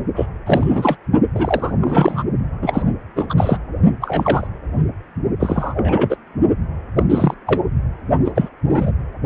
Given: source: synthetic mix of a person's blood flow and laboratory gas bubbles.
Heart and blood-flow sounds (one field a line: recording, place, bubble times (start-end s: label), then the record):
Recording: Doppler ultrasound of blood flow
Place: precordium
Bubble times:
0.16-0.26 s: bubbles
0.46-0.97 s: bubbles
1.34-1.72 s: bubbles
1.81-2.24 s: bubbles
2.62-2.83 s: bubbles
3.16-3.26 s: bubbles
3.29-3.34 s: bubbles
3.37-3.58 s: bubbles
4.01-4.47 s: bubbles
5.39-6.17 s: bubbles
6.96-7.04 s: bubbles
7.09-7.34 s: bubbles
7.46-7.61 s: bubbles
8.24-8.31 s: bubbles
8.35-8.49 s: bubbles
8.70-8.91 s: bubbles
From the record:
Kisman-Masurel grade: 243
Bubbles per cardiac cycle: several, 3 to 8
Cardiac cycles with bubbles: 100%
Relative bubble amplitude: loud (0.450 to 0.775)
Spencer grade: 3 (all of the cardiac periods contain showers or single bubble signals, but not dominating or overriding the cardiac motion signals)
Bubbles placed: only in the low amplitude regions of the cardiac cycle